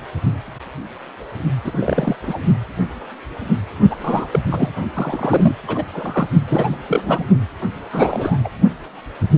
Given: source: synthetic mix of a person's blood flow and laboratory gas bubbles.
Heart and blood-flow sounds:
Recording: Doppler ultrasound of blood flow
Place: precordium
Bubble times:
1.61-2.16 s: bubbles
2.21-2.38 s: bubbles
3.90-3.96 s: bubbles
4.00-4.27 s: bubbles
4.31-4.39 s: bubbles
4.50-4.70 s: bubbles
4.95-5.55 s: bubbles
5.67-5.83 s: bubbles
5.92-6.27 s: bubbles
6.47-6.77 s: bubbles
6.88-7.25 s: bubbles
7.93-8.38 s: bubbles
8.44-8.48 s: bubbles
From the record:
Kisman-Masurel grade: 332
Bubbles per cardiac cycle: rolling drumbeat, 9 or more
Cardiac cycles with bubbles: 50 to 99%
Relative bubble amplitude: moderate (0.250 to 0.450)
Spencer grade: 3 (all of the cardiac periods contain showers or single bubble signals, but not dominating or overriding the cardiac motion signals)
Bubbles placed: only in the low amplitude regions of the cardiac cycle

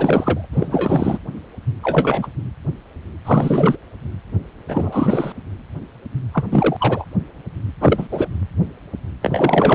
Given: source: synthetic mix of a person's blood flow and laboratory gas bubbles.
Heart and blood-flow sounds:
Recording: Doppler ultrasound of blood flow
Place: precordium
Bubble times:
0.00-0.48 s: bubbles
0.52-1.19 s: bubbles
1.82-2.27 s: bubbles
3.25-3.76 s: bubbles
4.68-5.33 s: bubbles
6.32-6.44 s: bubbles
6.51-7.04 s: bubbles
7.81-8.08 s: bubbles
8.12-8.29 s: bubbles
9.22-9.75 s: bubbles
From the record:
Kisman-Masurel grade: 333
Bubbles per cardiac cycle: rolling drumbeat, 9 or more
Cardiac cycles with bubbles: 50 to 99%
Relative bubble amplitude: loud (0.450 to 0.775)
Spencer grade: 3 (all of the cardiac periods contain showers or single bubble signals, but not dominating or overriding the cardiac motion signals)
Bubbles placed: anywhere in the cardiac cycle

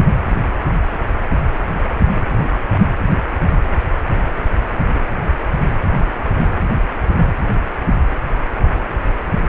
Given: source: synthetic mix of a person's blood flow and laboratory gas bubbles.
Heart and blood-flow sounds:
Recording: Doppler ultrasound of blood flow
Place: precordium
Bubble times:
6.39-6.42 s: bubbles
From the record:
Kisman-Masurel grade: 111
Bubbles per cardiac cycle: 1 to 2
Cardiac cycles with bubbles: 1 to 10%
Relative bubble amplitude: barely perceptible (0.100 to 0.250)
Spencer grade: 1 (occasional bubble signal discernible with the cardiac motion signal, with majority of cardiac periods free of bubbles)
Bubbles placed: anywhere in the cardiac cycle

